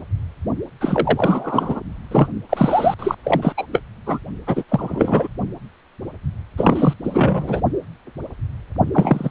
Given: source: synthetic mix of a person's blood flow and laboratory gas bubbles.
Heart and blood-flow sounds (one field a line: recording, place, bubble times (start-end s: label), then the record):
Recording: Doppler ultrasound of blood flow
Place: precordium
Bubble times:
0.80-1.81 s: bubbles
2.11-2.28 s: bubbles
2.49-2.94 s: bubbles
2.99-3.15 s: bubbles
3.23-3.54 s: bubbles
3.57-3.66 s: bubbles
3.73-3.81 s: bubbles
4.06-4.19 s: bubbles
4.47-4.64 s: bubbles
4.69-5.28 s: bubbles
6.57-6.94 s: bubbles
7.04-7.61 s: bubbles
8.93-9.31 s: bubbles
From the record:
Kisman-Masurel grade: 333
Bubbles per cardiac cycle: rolling drumbeat, 9 or more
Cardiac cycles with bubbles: 50 to 99%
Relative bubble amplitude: loud (0.450 to 0.775)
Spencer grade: 3 (all of the cardiac periods contain showers or single bubble signals, but not dominating or overriding the cardiac motion signals)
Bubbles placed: only in the low amplitude regions of the cardiac cycle